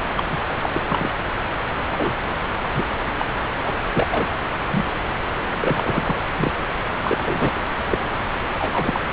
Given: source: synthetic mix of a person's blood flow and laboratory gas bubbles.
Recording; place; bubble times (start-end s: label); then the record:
Doppler ultrasound of blood flow; subclavian vein
0.16-0.40 s: bubbles
0.61-0.70 s: bubbles
0.73-0.81 s: bubbles
0.88-1.10 s: bubbles
1.91-2.12 s: bubbles
2.74-2.88 s: bubbles
3.17-3.25 s: bubbles
3.65-3.73 s: bubbles
3.93-4.07 s: bubbles
4.11-4.27 s: bubbles
4.70-4.85 s: bubbles
5.58-6.16 s: bubbles
6.37-6.52 s: bubbles
7.03-7.52 s: bubbles
7.85-7.99 s: bubbles
8.54-9.00 s: bubbles
From the record:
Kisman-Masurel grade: 242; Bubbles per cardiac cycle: several, 3 to 8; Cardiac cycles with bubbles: 100%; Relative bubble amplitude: moderate (0.250 to 0.450); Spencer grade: 3 (all of the cardiac periods contain showers or single bubble signals, but not dominating or overriding the cardiac motion signals); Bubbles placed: anywhere in the cardiac cycle